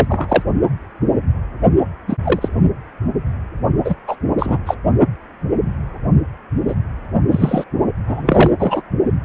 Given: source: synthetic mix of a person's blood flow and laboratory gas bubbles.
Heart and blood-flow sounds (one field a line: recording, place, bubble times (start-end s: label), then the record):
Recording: Doppler ultrasound of blood flow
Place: precordium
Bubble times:
0.00-0.42 s: bubbles
2.07-2.15 s: bubbles
2.23-2.48 s: bubbles
3.84-3.95 s: bubbles
4.07-4.16 s: bubbles
4.38-4.58 s: bubbles
4.66-4.75 s: bubbles
6.67-6.75 s: bubbles
7.31-7.64 s: bubbles
8.06-8.51 s: bubbles
8.59-8.82 s: bubbles
From the record:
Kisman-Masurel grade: 233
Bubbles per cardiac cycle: several, 3 to 8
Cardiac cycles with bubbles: 50 to 99%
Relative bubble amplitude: loud (0.450 to 0.775)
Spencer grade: 3 (all of the cardiac periods contain showers or single bubble signals, but not dominating or overriding the cardiac motion signals)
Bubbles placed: only in the low amplitude regions of the cardiac cycle